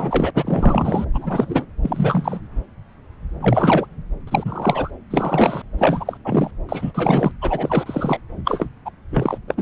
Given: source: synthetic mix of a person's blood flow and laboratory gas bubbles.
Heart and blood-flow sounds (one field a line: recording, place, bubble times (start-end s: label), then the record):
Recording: Doppler ultrasound of blood flow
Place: subclavian vein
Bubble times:
0.00-0.30 s: bubbles
0.35-1.05 s: bubbles
1.14-1.67 s: bubbles
1.83-2.40 s: bubbles
3.41-3.87 s: bubbles
4.27-4.90 s: bubbles
5.10-5.62 s: bubbles
5.78-6.17 s: bubbles
6.24-6.51 s: bubbles
6.68-7.31 s: bubbles
7.41-8.21 s: bubbles
8.45-8.68 s: bubbles
8.85-8.91 s: bubbles
9.11-9.38 s: bubbles
9.47-9.54 s: bubbles
9.57-9.62 s: bubbles
From the record:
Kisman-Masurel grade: 333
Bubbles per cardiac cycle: rolling drumbeat, 9 or more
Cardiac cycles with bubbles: 50 to 99%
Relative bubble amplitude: loud (0.450 to 0.775)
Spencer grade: 3 (all of the cardiac periods contain showers or single bubble signals, but not dominating or overriding the cardiac motion signals)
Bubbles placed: anywhere in the cardiac cycle